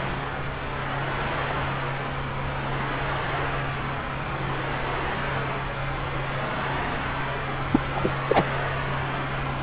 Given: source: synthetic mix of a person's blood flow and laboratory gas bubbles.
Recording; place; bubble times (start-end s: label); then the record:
Doppler ultrasound of blood flow; subclavian vein
7.72-7.79 s: bubbles
7.96-8.12 s: bubbles
8.28-8.44 s: bubbles
From the record:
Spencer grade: 2 (many but less than half of the cardiac periods contain bubble signals, singularly or in groups); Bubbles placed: anywhere in the cardiac cycle